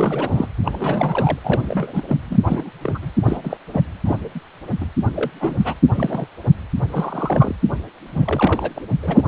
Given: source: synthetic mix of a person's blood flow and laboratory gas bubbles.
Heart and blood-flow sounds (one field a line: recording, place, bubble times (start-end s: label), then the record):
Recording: Doppler ultrasound of blood flow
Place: precordium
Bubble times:
0.00-0.48 s: bubbles
0.64-1.39 s: bubbles
1.44-2.02 s: bubbles
2.08-2.17 s: bubbles
2.29-2.40 s: bubbles
2.46-2.69 s: bubbles
2.83-2.98 s: bubbles
3.02-3.11 s: bubbles
3.24-3.42 s: bubbles
3.44-3.57 s: bubbles
3.73-3.82 s: bubbles
4.05-4.17 s: bubbles
4.34-4.40 s: bubbles
4.80-4.87 s: bubbles
5.15-5.30 s: bubbles
5.40-5.74 s: bubbles
5.93-6.27 s: bubbles
6.92-7.55 s: bubbles
8.12-8.70 s: bubbles
8.75-8.80 s: bubbles
9.03-9.22 s: bubbles
From the record:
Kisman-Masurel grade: 242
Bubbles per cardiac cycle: several, 3 to 8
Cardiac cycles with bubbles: 100%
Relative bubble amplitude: moderate (0.250 to 0.450)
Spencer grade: 3 (all of the cardiac periods contain showers or single bubble signals, but not dominating or overriding the cardiac motion signals)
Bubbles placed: anywhere in the cardiac cycle